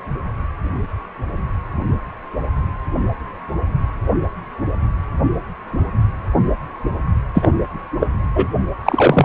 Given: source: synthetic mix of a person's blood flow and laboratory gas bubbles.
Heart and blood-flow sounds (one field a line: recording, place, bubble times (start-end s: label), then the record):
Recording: Doppler ultrasound of blood flow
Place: precordium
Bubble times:
7.34-7.50 s: bubbles
7.99-8.07 s: bubbles
8.35-8.47 s: bubbles
8.84-9.25 s: bubbles
From the record:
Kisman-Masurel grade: 223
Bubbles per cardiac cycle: several, 3 to 8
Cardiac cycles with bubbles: 10 to 50%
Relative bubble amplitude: loud (0.450 to 0.775)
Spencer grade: 2 (many but less than half of the cardiac periods contain bubble signals, singularly or in groups)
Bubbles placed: anywhere in the cardiac cycle